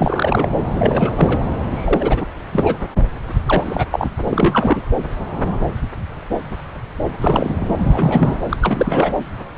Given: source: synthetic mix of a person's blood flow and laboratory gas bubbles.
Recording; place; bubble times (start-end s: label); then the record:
Doppler ultrasound of blood flow; subclavian vein
0.00-0.49 s: bubbles
0.72-1.12 s: bubbles
1.15-1.40 s: bubbles
1.72-2.26 s: bubbles
2.53-2.77 s: bubbles
3.46-3.86 s: bubbles
3.92-4.09 s: bubbles
4.17-4.21 s: bubbles
4.29-4.82 s: bubbles
7.21-7.76 s: bubbles
7.92-8.39 s: bubbles
8.49-8.57 s: bubbles
8.61-9.12 s: bubbles
From the record:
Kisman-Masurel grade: 332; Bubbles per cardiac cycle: rolling drumbeat, 9 or more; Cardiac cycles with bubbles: 50 to 99%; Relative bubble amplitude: moderate (0.250 to 0.450); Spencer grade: 3 (all of the cardiac periods contain showers or single bubble signals, but not dominating or overriding the cardiac motion signals); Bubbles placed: anywhere in the cardiac cycle